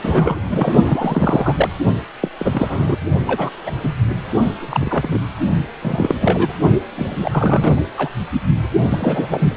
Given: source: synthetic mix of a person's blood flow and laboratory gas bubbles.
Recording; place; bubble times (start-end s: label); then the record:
Doppler ultrasound of blood flow; precordium
0.04-0.73 s: bubbles
0.82-1.69 s: bubbles
2.21-2.30 s: bubbles
2.39-2.97 s: bubbles
3.27-3.50 s: bubbles
3.65-3.71 s: bubbles
3.83-3.93 s: bubbles
4.60-5.08 s: bubbles
5.10-5.20 s: bubbles
5.81-6.15 s: bubbles
6.21-6.53 s: bubbles
6.96-7.83 s: bubbles
7.97-8.09 s: bubbles
8.88-9.54 s: bubbles
From the record:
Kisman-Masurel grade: 243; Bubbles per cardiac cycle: several, 3 to 8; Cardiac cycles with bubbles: 100%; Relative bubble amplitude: loud (0.450 to 0.775); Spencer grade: 3 (all of the cardiac periods contain showers or single bubble signals, but not dominating or overriding the cardiac motion signals); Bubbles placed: only in the low amplitude regions of the cardiac cycle